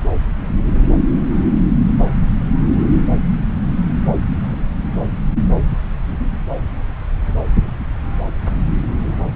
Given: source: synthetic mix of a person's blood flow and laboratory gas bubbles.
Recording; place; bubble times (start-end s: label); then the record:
Doppler ultrasound of blood flow; subclavian vein
no bubbles
From the record:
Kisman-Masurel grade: 000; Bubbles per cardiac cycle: 0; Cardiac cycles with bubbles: 0%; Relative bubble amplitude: no bubbles discernible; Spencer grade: 0 (complete lack of bubble signals)